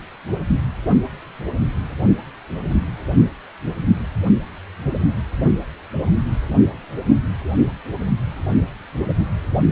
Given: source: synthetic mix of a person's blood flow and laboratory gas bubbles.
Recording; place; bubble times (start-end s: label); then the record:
Doppler ultrasound of blood flow; precordium
no bubbles
From the record:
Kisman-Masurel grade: 000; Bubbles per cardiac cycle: 0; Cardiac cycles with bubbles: 0%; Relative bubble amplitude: no bubbles discernible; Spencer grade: 0 (complete lack of bubble signals)